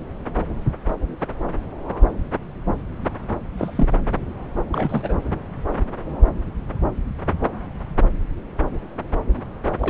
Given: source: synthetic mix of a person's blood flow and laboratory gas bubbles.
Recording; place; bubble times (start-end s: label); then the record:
Doppler ultrasound of blood flow; subclavian vein
3.58-3.89 s: bubbles
4.72-5.13 s: bubbles
9.80-9.90 s: bubbles
From the record:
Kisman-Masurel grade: 222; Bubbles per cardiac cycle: several, 3 to 8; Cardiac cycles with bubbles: 10 to 50%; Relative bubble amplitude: moderate (0.250 to 0.450); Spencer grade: 2 (many but less than half of the cardiac periods contain bubble signals, singularly or in groups); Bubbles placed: anywhere in the cardiac cycle